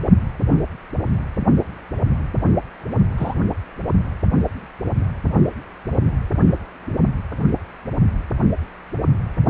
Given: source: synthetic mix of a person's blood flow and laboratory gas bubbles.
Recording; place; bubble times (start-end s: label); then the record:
Doppler ultrasound of blood flow; precordium
3.17-3.35 s: bubbles
From the record:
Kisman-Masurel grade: 113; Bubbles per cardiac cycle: 1 to 2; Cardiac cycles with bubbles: 1 to 10%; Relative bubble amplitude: loud (0.450 to 0.775); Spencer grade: 1 (occasional bubble signal discernible with the cardiac motion signal, with majority of cardiac periods free of bubbles); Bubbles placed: only in the low amplitude regions of the cardiac cycle